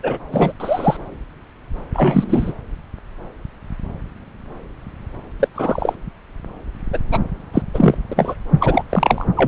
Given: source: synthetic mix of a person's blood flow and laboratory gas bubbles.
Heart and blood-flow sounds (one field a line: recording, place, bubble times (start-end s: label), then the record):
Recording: Doppler ultrasound of blood flow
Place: subclavian vein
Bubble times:
0.03-0.19 s: bubbles
0.32-0.53 s: bubbles
0.60-0.97 s: bubbles
1.93-2.52 s: bubbles
5.39-5.48 s: bubbles
5.54-5.95 s: bubbles
6.93-6.99 s: bubbles
7.11-7.20 s: bubbles
7.54-7.62 s: bubbles
7.74-7.95 s: bubbles
8.12-8.35 s: bubbles
8.60-8.83 s: bubbles
8.89-9.25 s: bubbles
9.36-9.48 s: bubbles
From the record:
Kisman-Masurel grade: 233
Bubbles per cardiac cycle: several, 3 to 8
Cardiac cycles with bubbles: 50 to 99%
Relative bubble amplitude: loud (0.450 to 0.775)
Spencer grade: 3 (all of the cardiac periods contain showers or single bubble signals, but not dominating or overriding the cardiac motion signals)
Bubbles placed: anywhere in the cardiac cycle